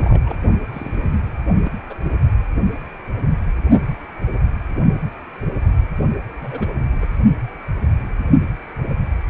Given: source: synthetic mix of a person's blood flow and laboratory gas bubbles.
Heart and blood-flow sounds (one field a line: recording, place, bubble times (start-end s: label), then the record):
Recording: Doppler ultrasound of blood flow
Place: precordium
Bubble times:
0.00-0.38 s: bubbles
0.72-1.06 s: bubbles
1.65-1.70 s: bubbles
1.90-1.95 s: bubbles
2.02-2.16 s: bubbles
6.41-6.67 s: bubbles
6.96-7.05 s: bubbles
From the record:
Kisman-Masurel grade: 221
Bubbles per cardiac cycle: several, 3 to 8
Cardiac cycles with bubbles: 10 to 50%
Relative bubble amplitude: barely perceptible (0.100 to 0.250)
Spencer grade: 2 (many but less than half of the cardiac periods contain bubble signals, singularly or in groups)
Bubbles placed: only in the low amplitude regions of the cardiac cycle